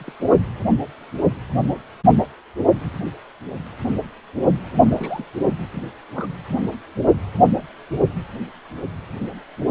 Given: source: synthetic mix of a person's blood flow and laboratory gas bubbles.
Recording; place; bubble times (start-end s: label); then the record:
Doppler ultrasound of blood flow; precordium
0.00-0.12 s: bubbles
0.20-0.26 s: bubbles
4.79-5.25 s: bubbles
5.71-5.83 s: bubbles
6.13-6.27 s: bubbles
From the record:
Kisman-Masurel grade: 221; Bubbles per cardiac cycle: several, 3 to 8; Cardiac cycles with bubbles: 10 to 50%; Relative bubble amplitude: barely perceptible (0.100 to 0.250); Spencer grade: 2 (many but less than half of the cardiac periods contain bubble signals, singularly or in groups); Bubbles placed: anywhere in the cardiac cycle